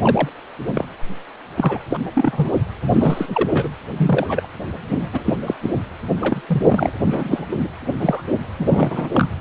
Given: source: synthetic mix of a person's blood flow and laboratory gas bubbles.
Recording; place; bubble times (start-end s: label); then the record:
Doppler ultrasound of blood flow; precordium
0.02-0.30 s: bubbles
0.67-0.85 s: bubbles
1.57-1.78 s: bubbles
1.89-1.99 s: bubbles
2.15-2.56 s: bubbles
2.90-3.49 s: bubbles
3.53-3.68 s: bubbles
3.97-4.48 s: bubbles
4.88-5.34 s: bubbles
5.46-5.54 s: bubbles
5.62-5.71 s: bubbles
6.21-6.42 s: bubbles
6.48-6.92 s: bubbles
7.04-7.46 s: bubbles
7.52-7.68 s: bubbles
8.00-8.23 s: bubbles
8.59-9.10 s: bubbles
9.14-9.29 s: bubbles
From the record:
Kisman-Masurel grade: 243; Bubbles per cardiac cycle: several, 3 to 8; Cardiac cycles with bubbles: 100%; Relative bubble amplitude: loud (0.450 to 0.775); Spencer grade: 3 (all of the cardiac periods contain showers or single bubble signals, but not dominating or overriding the cardiac motion signals); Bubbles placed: anywhere in the cardiac cycle